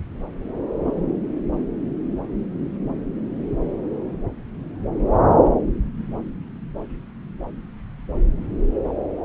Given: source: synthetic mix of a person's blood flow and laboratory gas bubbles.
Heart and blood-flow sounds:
Doppler ultrasound of blood flow; subclavian vein
no bubbles
From the record:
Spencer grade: 0 (complete lack of bubble signals)

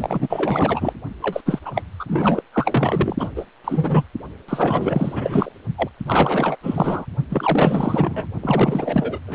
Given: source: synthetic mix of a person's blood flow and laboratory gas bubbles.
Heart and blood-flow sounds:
Doppler ultrasound of blood flow; precordium
0.00-0.93 s: bubbles
1.22-1.41 s: bubbles
1.46-1.59 s: bubbles
1.61-1.82 s: bubbles
1.99-2.05 s: bubbles
2.08-2.42 s: bubbles
2.53-3.32 s: bubbles
3.35-3.46 s: bubbles
3.64-4.04 s: bubbles
4.48-5.52 s: bubbles
5.76-5.89 s: bubbles
6.05-6.56 s: bubbles
6.62-7.05 s: bubbles
7.29-8.28 s: bubbles
8.41-9.19 s: bubbles
9.26-9.35 s: bubbles
From the record:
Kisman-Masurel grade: 444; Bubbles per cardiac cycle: continuous sound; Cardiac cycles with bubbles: 100%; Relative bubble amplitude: maximal (0.775 to 0.999); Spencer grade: 4 (maximum detectable bubble signal sounding continuously throughout systole and diastole of every cardiac period, and overriding the amplitude of the normal cardiac signals); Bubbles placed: only in the low amplitude regions of the cardiac cycle

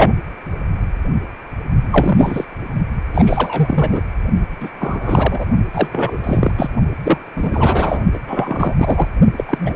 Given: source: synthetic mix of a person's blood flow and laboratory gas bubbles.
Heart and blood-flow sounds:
Doppler ultrasound of blood flow; precordium
0.00-0.13 s: bubbles
1.92-2.45 s: bubbles
3.14-4.01 s: bubbles
4.60-4.70 s: bubbles
4.79-5.46 s: bubbles
5.73-5.88 s: bubbles
5.91-6.18 s: bubbles
6.23-6.52 s: bubbles
6.56-6.69 s: bubbles
7.04-7.18 s: bubbles
7.34-8.00 s: bubbles
8.13-8.19 s: bubbles
8.27-9.07 s: bubbles
9.37-9.44 s: bubbles
9.47-9.76 s: bubbles
From the record:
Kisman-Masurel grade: 343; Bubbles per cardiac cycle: rolling drumbeat, 9 or more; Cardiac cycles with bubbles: 100%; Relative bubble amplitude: loud (0.450 to 0.775); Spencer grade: 3 (all of the cardiac periods contain showers or single bubble signals, but not dominating or overriding the cardiac motion signals); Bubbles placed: only in the low amplitude regions of the cardiac cycle

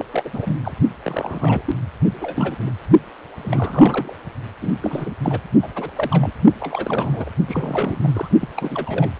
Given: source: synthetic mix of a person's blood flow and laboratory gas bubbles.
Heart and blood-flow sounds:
Doppler ultrasound of blood flow; precordium
0.00-0.05 s: bubbles
0.11-0.30 s: bubbles
0.33-0.60 s: bubbles
0.64-0.72 s: bubbles
1.04-1.62 s: bubbles
1.65-1.75 s: bubbles
2.21-2.71 s: bubbles
3.36-4.13 s: bubbles
4.61-4.73 s: bubbles
4.82-5.13 s: bubbles
5.22-5.40 s: bubbles
5.62-5.68 s: bubbles
5.74-5.91 s: bubbles
5.96-6.32 s: bubbles
6.59-7.29 s: bubbles
7.46-8.28 s: bubbles
8.40-8.48 s: bubbles
8.56-9.10 s: bubbles
From the record:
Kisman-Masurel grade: 342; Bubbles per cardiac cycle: rolling drumbeat, 9 or more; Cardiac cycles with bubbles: 100%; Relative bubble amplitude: moderate (0.250 to 0.450); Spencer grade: 3 (all of the cardiac periods contain showers or single bubble signals, but not dominating or overriding the cardiac motion signals); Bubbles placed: only in the low amplitude regions of the cardiac cycle

